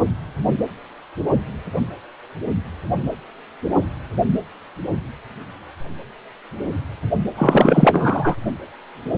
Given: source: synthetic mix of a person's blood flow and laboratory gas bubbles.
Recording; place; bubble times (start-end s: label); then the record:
Doppler ultrasound of blood flow; precordium
7.36-8.35 s: bubbles
From the record:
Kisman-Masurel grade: 213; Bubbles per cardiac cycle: several, 3 to 8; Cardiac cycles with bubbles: 1 to 10%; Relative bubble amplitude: loud (0.450 to 0.775); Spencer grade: 1 (occasional bubble signal discernible with the cardiac motion signal, with majority of cardiac periods free of bubbles); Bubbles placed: only in the low amplitude regions of the cardiac cycle